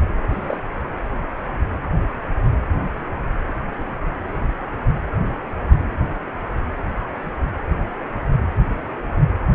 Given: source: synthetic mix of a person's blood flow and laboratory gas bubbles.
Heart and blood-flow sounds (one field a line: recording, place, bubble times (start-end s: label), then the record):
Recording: Doppler ultrasound of blood flow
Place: precordium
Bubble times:
0.29-0.59 s: bubbles
From the record:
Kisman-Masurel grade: 111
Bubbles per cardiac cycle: 1 to 2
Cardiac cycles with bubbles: 1 to 10%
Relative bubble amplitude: barely perceptible (0.100 to 0.250)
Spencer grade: 1 (occasional bubble signal discernible with the cardiac motion signal, with majority of cardiac periods free of bubbles)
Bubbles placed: anywhere in the cardiac cycle